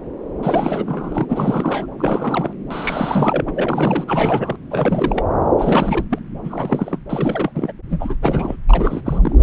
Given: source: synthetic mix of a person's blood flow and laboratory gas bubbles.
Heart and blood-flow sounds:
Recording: Doppler ultrasound of blood flow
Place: subclavian vein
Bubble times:
0.43-1.25 s: bubbles
1.29-1.86 s: bubbles
1.98-2.54 s: bubbles
2.70-4.04 s: bubbles
4.07-4.57 s: bubbles
4.71-5.23 s: bubbles
5.58-6.05 s: bubbles
6.10-6.19 s: bubbles
6.44-6.99 s: bubbles
7.09-7.72 s: bubbles
7.90-8.16 s: bubbles
8.22-8.56 s: bubbles
8.69-9.01 s: bubbles
9.05-9.18 s: bubbles
9.21-9.38 s: bubbles
From the record:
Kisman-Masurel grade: 332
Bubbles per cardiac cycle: rolling drumbeat, 9 or more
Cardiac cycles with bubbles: 50 to 99%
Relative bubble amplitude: moderate (0.250 to 0.450)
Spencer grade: 3 (all of the cardiac periods contain showers or single bubble signals, but not dominating or overriding the cardiac motion signals)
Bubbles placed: anywhere in the cardiac cycle

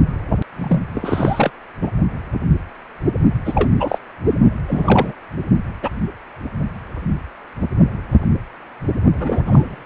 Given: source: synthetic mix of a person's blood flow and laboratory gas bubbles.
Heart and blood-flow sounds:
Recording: Doppler ultrasound of blood flow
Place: precordium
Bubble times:
0.58-0.80 s: bubbles
0.93-1.51 s: bubbles
1.81-1.91 s: bubbles
3.45-3.69 s: bubbles
3.79-3.99 s: bubbles
4.67-5.12 s: bubbles
5.83-5.89 s: bubbles
9.20-9.42 s: bubbles
9.45-9.83 s: bubbles
From the record:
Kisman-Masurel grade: 233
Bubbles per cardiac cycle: several, 3 to 8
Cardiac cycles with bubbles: 50 to 99%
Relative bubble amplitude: loud (0.450 to 0.775)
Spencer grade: 3 (all of the cardiac periods contain showers or single bubble signals, but not dominating or overriding the cardiac motion signals)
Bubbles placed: only in the low amplitude regions of the cardiac cycle

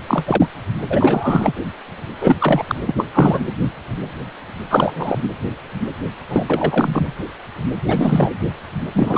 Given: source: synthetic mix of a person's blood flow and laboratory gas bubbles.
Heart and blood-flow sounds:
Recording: Doppler ultrasound of blood flow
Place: precordium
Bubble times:
0.00-0.02 s: bubbles
0.07-0.46 s: bubbles
0.90-1.53 s: bubbles
2.20-2.64 s: bubbles
2.67-2.75 s: bubbles
2.87-2.94 s: bubbles
2.98-3.06 s: bubbles
3.14-3.39 s: bubbles
4.70-5.19 s: bubbles
6.28-6.44 s: bubbles
6.47-7.12 s: bubbles
7.88-8.30 s: bubbles
8.93-9.18 s: bubbles
From the record:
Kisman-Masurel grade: 333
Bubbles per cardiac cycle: rolling drumbeat, 9 or more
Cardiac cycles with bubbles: 50 to 99%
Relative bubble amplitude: loud (0.450 to 0.775)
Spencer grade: 3 (all of the cardiac periods contain showers or single bubble signals, but not dominating or overriding the cardiac motion signals)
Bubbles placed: anywhere in the cardiac cycle

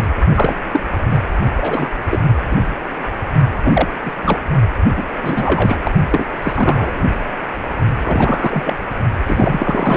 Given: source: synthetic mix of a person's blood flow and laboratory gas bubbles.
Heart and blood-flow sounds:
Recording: Doppler ultrasound of blood flow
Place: precordium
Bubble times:
0.00-0.06 s: bubbles
0.34-0.54 s: bubbles
0.71-0.81 s: bubbles
1.10-1.18 s: bubbles
1.56-1.93 s: bubbles
2.10-2.20 s: bubbles
2.51-2.57 s: bubbles
3.64-3.88 s: bubbles
4.04-4.12 s: bubbles
4.22-4.39 s: bubbles
4.96-5.04 s: bubbles
5.19-5.77 s: bubbles
5.80-5.92 s: bubbles
6.10-6.24 s: bubbles
6.42-7.04 s: bubbles
8.04-8.76 s: bubbles
9.26-9.97 s: bubbles
From the record:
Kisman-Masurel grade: 243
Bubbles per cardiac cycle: several, 3 to 8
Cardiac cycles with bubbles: 100%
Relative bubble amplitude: loud (0.450 to 0.775)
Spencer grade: 3 (all of the cardiac periods contain showers or single bubble signals, but not dominating or overriding the cardiac motion signals)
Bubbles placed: only in the low amplitude regions of the cardiac cycle

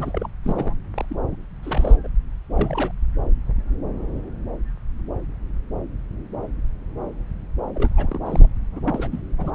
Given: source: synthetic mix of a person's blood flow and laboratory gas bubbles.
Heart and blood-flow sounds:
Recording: Doppler ultrasound of blood flow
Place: subclavian vein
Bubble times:
0.00-0.28 s: bubbles
0.44-0.73 s: bubbles
0.94-1.05 s: bubbles
1.09-1.16 s: bubbles
1.30-1.36 s: bubbles
1.63-1.97 s: bubbles
2.03-2.08 s: bubbles
2.54-2.91 s: bubbles
7.74-8.18 s: bubbles
8.26-8.46 s: bubbles
8.72-8.80 s: bubbles
8.86-9.08 s: bubbles
9.12-9.20 s: bubbles
9.38-9.51 s: bubbles
From the record:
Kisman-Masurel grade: 221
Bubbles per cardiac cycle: several, 3 to 8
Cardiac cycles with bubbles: 10 to 50%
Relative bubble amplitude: barely perceptible (0.100 to 0.250)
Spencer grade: 2 (many but less than half of the cardiac periods contain bubble signals, singularly or in groups)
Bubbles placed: anywhere in the cardiac cycle

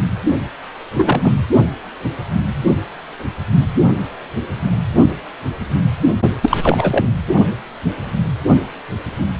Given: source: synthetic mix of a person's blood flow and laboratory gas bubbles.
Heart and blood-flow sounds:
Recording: Doppler ultrasound of blood flow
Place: precordium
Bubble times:
0.96-1.32 s: bubbles
6.42-6.58 s: bubbles
6.63-7.11 s: bubbles
From the record:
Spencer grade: 2 (many but less than half of the cardiac periods contain bubble signals, singularly or in groups)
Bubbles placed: only in the low amplitude regions of the cardiac cycle

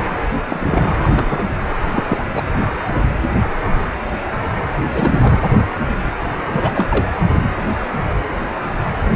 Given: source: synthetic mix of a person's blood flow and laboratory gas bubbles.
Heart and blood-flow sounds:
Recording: Doppler ultrasound of blood flow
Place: precordium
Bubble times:
0.48-0.93 s: bubbles
1.03-1.09 s: bubbles
1.14-1.49 s: bubbles
1.92-2.03 s: bubbles
2.08-2.25 s: bubbles
2.32-2.43 s: bubbles
4.93-5.41 s: bubbles
6.53-7.08 s: bubbles
From the record:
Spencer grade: 2 (many but less than half of the cardiac periods contain bubble signals, singularly or in groups)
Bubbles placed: anywhere in the cardiac cycle

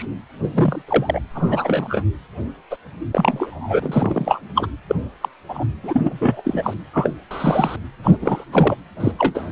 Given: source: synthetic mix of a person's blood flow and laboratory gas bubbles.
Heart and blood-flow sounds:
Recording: Doppler ultrasound of blood flow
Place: precordium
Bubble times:
0.00-0.05 s: bubbles
0.38-0.82 s: bubbles
0.87-1.20 s: bubbles
1.34-2.02 s: bubbles
2.70-2.76 s: bubbles
3.12-3.79 s: bubbles
3.82-4.42 s: bubbles
4.55-4.67 s: bubbles
4.88-4.96 s: bubbles
5.21-5.29 s: bubbles
5.49-5.65 s: bubbles
5.83-6.74 s: bubbles
6.93-7.11 s: bubbles
7.30-7.76 s: bubbles
8.04-8.18 s: bubbles
8.21-8.44 s: bubbles
8.52-8.76 s: bubbles
9.00-9.12 s: bubbles
9.19-9.52 s: bubbles
From the record:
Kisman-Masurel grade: 243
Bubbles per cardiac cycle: several, 3 to 8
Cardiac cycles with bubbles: 100%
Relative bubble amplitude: loud (0.450 to 0.775)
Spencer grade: 3 (all of the cardiac periods contain showers or single bubble signals, but not dominating or overriding the cardiac motion signals)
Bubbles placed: anywhere in the cardiac cycle

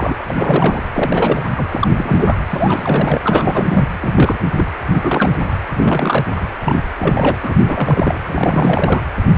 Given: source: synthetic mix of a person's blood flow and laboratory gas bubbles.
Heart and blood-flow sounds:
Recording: Doppler ultrasound of blood flow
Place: precordium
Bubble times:
0.00-0.22 s: bubbles
0.29-0.82 s: bubbles
0.93-1.50 s: bubbles
1.56-1.88 s: bubbles
1.95-2.39 s: bubbles
2.50-3.88 s: bubbles
4.00-4.38 s: bubbles
4.57-4.64 s: bubbles
4.94-5.57 s: bubbles
5.73-6.24 s: bubbles
6.35-6.43 s: bubbles
6.61-6.80 s: bubbles
6.97-7.38 s: bubbles
7.43-8.20 s: bubbles
8.26-9.04 s: bubbles
From the record:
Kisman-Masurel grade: 342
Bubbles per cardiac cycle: rolling drumbeat, 9 or more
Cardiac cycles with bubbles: 100%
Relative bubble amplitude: moderate (0.250 to 0.450)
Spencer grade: 3 (all of the cardiac periods contain showers or single bubble signals, but not dominating or overriding the cardiac motion signals)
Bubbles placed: anywhere in the cardiac cycle

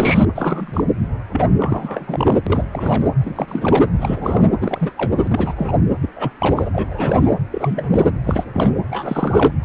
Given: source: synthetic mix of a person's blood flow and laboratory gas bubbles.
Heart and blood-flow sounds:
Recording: Doppler ultrasound of blood flow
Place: precordium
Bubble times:
0.00-0.25 s: bubbles
0.35-0.84 s: bubbles
1.32-1.49 s: bubbles
1.59-2.41 s: bubbles
2.47-2.65 s: bubbles
2.73-3.10 s: bubbles
3.20-3.88 s: bubbles
3.98-4.50 s: bubbles
4.61-4.92 s: bubbles
4.97-5.12 s: bubbles
5.17-5.54 s: bubbles
5.57-5.82 s: bubbles
6.02-6.09 s: bubbles
6.16-6.32 s: bubbles
6.40-6.69 s: bubbles
6.73-7.34 s: bubbles
7.51-8.10 s: bubbles
8.23-8.45 s: bubbles
8.54-8.71 s: bubbles
8.90-9.51 s: bubbles
9.62-9.65 s: bubbles
From the record:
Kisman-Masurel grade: 342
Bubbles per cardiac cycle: rolling drumbeat, 9 or more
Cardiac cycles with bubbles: 100%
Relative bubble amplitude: moderate (0.250 to 0.450)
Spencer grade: 3 (all of the cardiac periods contain showers or single bubble signals, but not dominating or overriding the cardiac motion signals)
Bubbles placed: anywhere in the cardiac cycle

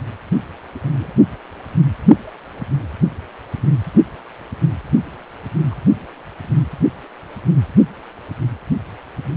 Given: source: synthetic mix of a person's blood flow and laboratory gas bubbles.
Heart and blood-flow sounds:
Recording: Doppler ultrasound of blood flow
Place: precordium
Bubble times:
0.75-1.12 s: bubbles
5.71-5.75 s: bubbles
From the record:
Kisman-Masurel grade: 121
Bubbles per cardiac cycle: 1 to 2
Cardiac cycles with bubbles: 10 to 50%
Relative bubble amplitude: barely perceptible (0.100 to 0.250)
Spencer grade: 2 (many but less than half of the cardiac periods contain bubble signals, singularly or in groups)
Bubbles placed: only in the low amplitude regions of the cardiac cycle

